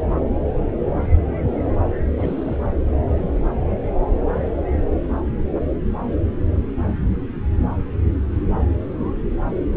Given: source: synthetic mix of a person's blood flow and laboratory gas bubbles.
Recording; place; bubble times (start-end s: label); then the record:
Doppler ultrasound of blood flow; subclavian vein
2.18-2.57 s: bubbles
From the record:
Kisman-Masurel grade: 211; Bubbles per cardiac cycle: several, 3 to 8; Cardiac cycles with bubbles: 1 to 10%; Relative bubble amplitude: barely perceptible (0.100 to 0.250); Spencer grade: 1 (occasional bubble signal discernible with the cardiac motion signal, with majority of cardiac periods free of bubbles); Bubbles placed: anywhere in the cardiac cycle